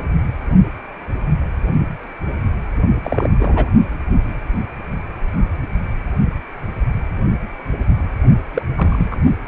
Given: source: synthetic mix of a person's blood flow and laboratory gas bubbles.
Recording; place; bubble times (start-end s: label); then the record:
Doppler ultrasound of blood flow; precordium
3.02-3.29 s: bubbles
3.40-3.69 s: bubbles
8.54-8.62 s: bubbles
8.76-9.16 s: bubbles
From the record:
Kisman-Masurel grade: 222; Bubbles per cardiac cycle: several, 3 to 8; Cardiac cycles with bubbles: 10 to 50%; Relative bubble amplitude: moderate (0.250 to 0.450); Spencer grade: 2 (many but less than half of the cardiac periods contain bubble signals, singularly or in groups); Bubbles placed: only in the low amplitude regions of the cardiac cycle